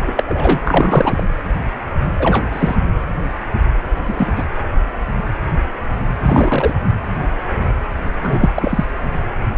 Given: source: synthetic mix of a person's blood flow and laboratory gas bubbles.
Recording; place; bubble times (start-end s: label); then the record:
Doppler ultrasound of blood flow; precordium
0.00-0.23 s: bubbles
0.27-0.60 s: bubbles
0.65-1.24 s: bubbles
2.19-2.44 s: bubbles
2.52-2.75 s: bubbles
4.06-4.27 s: bubbles
4.35-4.44 s: bubbles
6.22-6.74 s: bubbles
8.22-8.50 s: bubbles
8.54-8.85 s: bubbles
From the record:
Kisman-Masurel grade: 223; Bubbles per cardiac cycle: several, 3 to 8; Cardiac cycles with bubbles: 10 to 50%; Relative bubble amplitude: loud (0.450 to 0.775); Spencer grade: 2 (many but less than half of the cardiac periods contain bubble signals, singularly or in groups); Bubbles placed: anywhere in the cardiac cycle